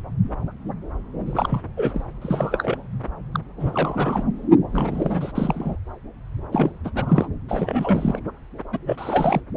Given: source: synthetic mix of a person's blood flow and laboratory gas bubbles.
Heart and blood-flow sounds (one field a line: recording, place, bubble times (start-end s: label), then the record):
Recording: Doppler ultrasound of blood flow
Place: subclavian vein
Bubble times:
1.26-1.62 s: bubbles
1.77-1.91 s: bubbles
1.94-2.04 s: bubbles
2.21-2.78 s: bubbles
3.33-3.40 s: bubbles
3.60-4.25 s: bubbles
4.72-5.32 s: bubbles
5.35-5.76 s: bubbles
6.52-6.72 s: bubbles
6.85-6.91 s: bubbles
6.95-7.28 s: bubbles
7.49-8.20 s: bubbles
8.72-8.78 s: bubbles
8.85-9.40 s: bubbles
From the record:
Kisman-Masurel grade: 332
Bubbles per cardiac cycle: rolling drumbeat, 9 or more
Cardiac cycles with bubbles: 50 to 99%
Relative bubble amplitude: moderate (0.250 to 0.450)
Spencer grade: 3 (all of the cardiac periods contain showers or single bubble signals, but not dominating or overriding the cardiac motion signals)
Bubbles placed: anywhere in the cardiac cycle